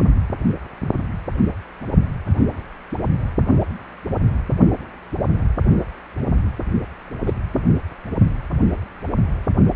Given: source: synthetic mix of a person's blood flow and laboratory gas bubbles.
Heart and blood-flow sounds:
Doppler ultrasound of blood flow; precordium
7.26-7.33 s: bubbles
7.54-7.61 s: bubbles
From the record:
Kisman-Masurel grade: 113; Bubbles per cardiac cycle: 1 to 2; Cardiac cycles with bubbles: 1 to 10%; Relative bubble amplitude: loud (0.450 to 0.775); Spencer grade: 1 (occasional bubble signal discernible with the cardiac motion signal, with majority of cardiac periods free of bubbles); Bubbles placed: only in the low amplitude regions of the cardiac cycle

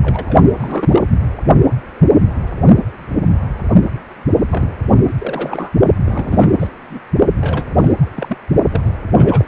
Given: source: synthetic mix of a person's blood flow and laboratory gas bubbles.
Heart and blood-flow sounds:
Doppler ultrasound of blood flow; precordium
0.03-0.38 s: bubbles
0.56-1.03 s: bubbles
4.50-4.68 s: bubbles
5.07-5.13 s: bubbles
5.18-5.71 s: bubbles
6.06-6.67 s: bubbles
6.89-7.00 s: bubbles
7.41-7.66 s: bubbles
7.78-7.92 s: bubbles
7.99-8.12 s: bubbles
8.16-8.38 s: bubbles
8.71-8.90 s: bubbles
9.17-9.48 s: bubbles
From the record:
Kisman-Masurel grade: 332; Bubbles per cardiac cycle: rolling drumbeat, 9 or more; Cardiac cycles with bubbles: 50 to 99%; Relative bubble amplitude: moderate (0.250 to 0.450); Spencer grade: 3 (all of the cardiac periods contain showers or single bubble signals, but not dominating or overriding the cardiac motion signals); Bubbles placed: only in the low amplitude regions of the cardiac cycle

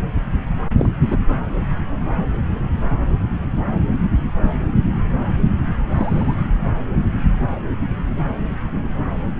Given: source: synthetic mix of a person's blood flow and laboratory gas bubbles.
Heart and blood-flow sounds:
Doppler ultrasound of blood flow; subclavian vein
0.77-0.89 s: bubbles
1.06-1.17 s: bubbles
5.96-6.34 s: bubbles
From the record:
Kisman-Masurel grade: 122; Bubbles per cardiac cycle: 1 to 2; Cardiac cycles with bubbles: 10 to 50%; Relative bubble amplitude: moderate (0.250 to 0.450); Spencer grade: 2 (many but less than half of the cardiac periods contain bubble signals, singularly or in groups); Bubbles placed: anywhere in the cardiac cycle

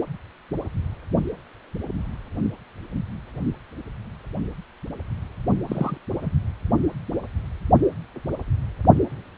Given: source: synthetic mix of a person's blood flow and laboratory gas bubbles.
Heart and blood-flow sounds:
Doppler ultrasound of blood flow; precordium
5.67-5.98 s: bubbles
6.22-6.31 s: bubbles
From the record:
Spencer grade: 2 (many but less than half of the cardiac periods contain bubble signals, singularly or in groups); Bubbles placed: only in the low amplitude regions of the cardiac cycle

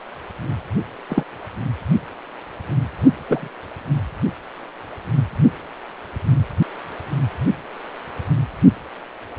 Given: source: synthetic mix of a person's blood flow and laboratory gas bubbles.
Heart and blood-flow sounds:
Doppler ultrasound of blood flow; precordium
1.08-1.24 s: bubbles
3.26-3.48 s: bubbles
From the record:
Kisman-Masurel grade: 122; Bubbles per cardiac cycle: 1 to 2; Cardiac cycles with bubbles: 10 to 50%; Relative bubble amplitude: moderate (0.250 to 0.450); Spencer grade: 2 (many but less than half of the cardiac periods contain bubble signals, singularly or in groups); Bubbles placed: only in the low amplitude regions of the cardiac cycle

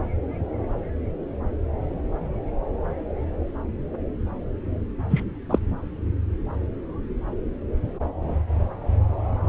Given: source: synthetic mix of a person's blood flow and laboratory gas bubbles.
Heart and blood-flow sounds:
Doppler ultrasound of blood flow; subclavian vein
5.10-5.23 s: bubbles
5.50-5.59 s: bubbles
From the record:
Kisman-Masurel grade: 113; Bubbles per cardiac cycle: 1 to 2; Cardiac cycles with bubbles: 1 to 10%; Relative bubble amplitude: loud (0.450 to 0.775); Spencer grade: 1 (occasional bubble signal discernible with the cardiac motion signal, with majority of cardiac periods free of bubbles); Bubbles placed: anywhere in the cardiac cycle

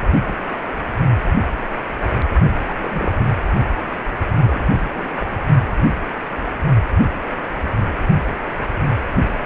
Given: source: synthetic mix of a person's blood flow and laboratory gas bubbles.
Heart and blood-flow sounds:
Doppler ultrasound of blood flow; precordium
0.21-0.36 s: bubbles
0.45-0.68 s: bubbles
2.67-2.75 s: bubbles
2.80-3.14 s: bubbles
3.17-3.26 s: bubbles
3.82-3.87 s: bubbles
4.38-4.90 s: bubbles
4.95-5.07 s: bubbles
5.17-5.37 s: bubbles
From the record:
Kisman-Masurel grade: 221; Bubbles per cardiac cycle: several, 3 to 8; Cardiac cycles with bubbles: 10 to 50%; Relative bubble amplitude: barely perceptible (0.100 to 0.250); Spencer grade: 2 (many but less than half of the cardiac periods contain bubble signals, singularly or in groups); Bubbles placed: only in the low amplitude regions of the cardiac cycle

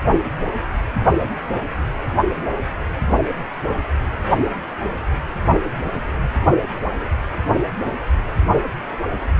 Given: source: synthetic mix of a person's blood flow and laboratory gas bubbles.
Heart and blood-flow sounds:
Doppler ultrasound of blood flow; precordium
no bubbles
From the record:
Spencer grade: 0 (complete lack of bubble signals)

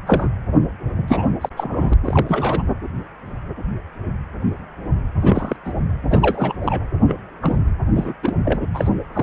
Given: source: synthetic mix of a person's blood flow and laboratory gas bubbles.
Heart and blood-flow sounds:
Doppler ultrasound of blood flow; precordium
0.06-0.30 s: bubbles
1.07-1.29 s: bubbles
1.41-1.49 s: bubbles
1.56-1.94 s: bubbles
2.04-2.63 s: bubbles
5.20-5.56 s: bubbles
5.64-5.72 s: bubbles
6.10-6.54 s: bubbles
6.64-6.85 s: bubbles
7.07-7.15 s: bubbles
7.41-7.56 s: bubbles
7.95-8.13 s: bubbles
8.22-8.36 s: bubbles
8.45-8.59 s: bubbles
8.74-8.90 s: bubbles
9.13-9.23 s: bubbles
From the record:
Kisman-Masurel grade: 233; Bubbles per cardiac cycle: several, 3 to 8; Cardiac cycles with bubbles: 50 to 99%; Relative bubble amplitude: loud (0.450 to 0.775); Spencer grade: 3 (all of the cardiac periods contain showers or single bubble signals, but not dominating or overriding the cardiac motion signals); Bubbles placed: anywhere in the cardiac cycle

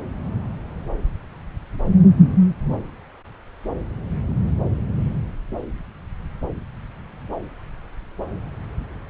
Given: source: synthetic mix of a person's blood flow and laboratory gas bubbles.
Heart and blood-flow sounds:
Doppler ultrasound of blood flow; subclavian vein
no bubbles
From the record:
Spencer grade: 0 (complete lack of bubble signals)

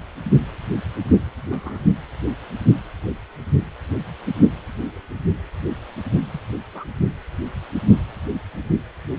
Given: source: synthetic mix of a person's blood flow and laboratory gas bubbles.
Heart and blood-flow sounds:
Doppler ultrasound of blood flow; precordium
1.47-1.88 s: bubbles
6.31-6.40 s: bubbles
6.74-6.84 s: bubbles
From the record:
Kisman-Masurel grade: 121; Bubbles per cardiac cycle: 1 to 2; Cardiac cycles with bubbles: 10 to 50%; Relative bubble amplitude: barely perceptible (0.100 to 0.250); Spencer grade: 2 (many but less than half of the cardiac periods contain bubble signals, singularly or in groups); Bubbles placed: only in the low amplitude regions of the cardiac cycle

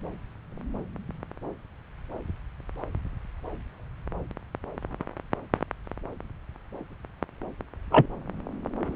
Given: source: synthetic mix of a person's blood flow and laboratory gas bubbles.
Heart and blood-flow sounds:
Doppler ultrasound of blood flow; subclavian vein
7.91-8.06 s: bubbles
From the record:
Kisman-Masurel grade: 113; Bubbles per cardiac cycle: 1 to 2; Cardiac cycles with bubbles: 1 to 10%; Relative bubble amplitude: loud (0.450 to 0.775); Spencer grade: 1 (occasional bubble signal discernible with the cardiac motion signal, with majority of cardiac periods free of bubbles); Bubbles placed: anywhere in the cardiac cycle

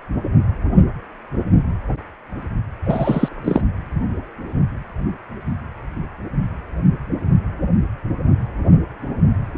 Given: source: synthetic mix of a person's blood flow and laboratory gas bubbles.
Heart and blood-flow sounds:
Doppler ultrasound of blood flow; precordium
2.85-3.29 s: bubbles
3.44-3.62 s: bubbles
From the record:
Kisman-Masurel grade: 213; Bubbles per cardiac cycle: several, 3 to 8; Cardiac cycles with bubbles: 1 to 10%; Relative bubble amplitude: loud (0.450 to 0.775); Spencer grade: 1 (occasional bubble signal discernible with the cardiac motion signal, with majority of cardiac periods free of bubbles); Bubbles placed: anywhere in the cardiac cycle

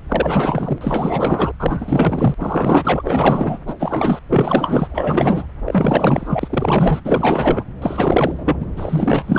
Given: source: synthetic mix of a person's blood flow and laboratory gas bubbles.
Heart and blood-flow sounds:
Doppler ultrasound of blood flow; subclavian vein
0.08-0.79 s: bubbles
0.81-1.52 s: bubbles
1.59-2.34 s: bubbles
2.38-3.58 s: bubbles
3.67-3.74 s: bubbles
3.79-4.19 s: bubbles
4.29-4.88 s: bubbles
4.91-5.46 s: bubbles
5.65-7.00 s: bubbles
7.04-7.64 s: bubbles
7.82-8.57 s: bubbles
8.60-8.66 s: bubbles
8.77-9.39 s: bubbles
From the record:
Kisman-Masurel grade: 444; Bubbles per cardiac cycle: continuous sound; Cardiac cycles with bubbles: 100%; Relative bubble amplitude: maximal (0.775 to 0.999); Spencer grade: 4 (maximum detectable bubble signal sounding continuously throughout systole and diastole of every cardiac period, and overriding the amplitude of the normal cardiac signals); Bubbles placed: anywhere in the cardiac cycle

